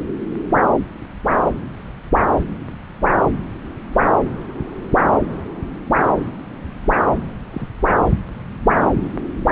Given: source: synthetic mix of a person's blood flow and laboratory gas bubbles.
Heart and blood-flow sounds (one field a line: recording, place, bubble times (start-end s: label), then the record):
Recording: Doppler ultrasound of blood flow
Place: subclavian vein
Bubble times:
7.52-7.67 s: bubbles
From the record:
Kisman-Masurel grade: 111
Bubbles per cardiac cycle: 1 to 2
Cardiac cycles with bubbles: 1 to 10%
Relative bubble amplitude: barely perceptible (0.100 to 0.250)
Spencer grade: 1 (occasional bubble signal discernible with the cardiac motion signal, with majority of cardiac periods free of bubbles)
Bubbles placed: anywhere in the cardiac cycle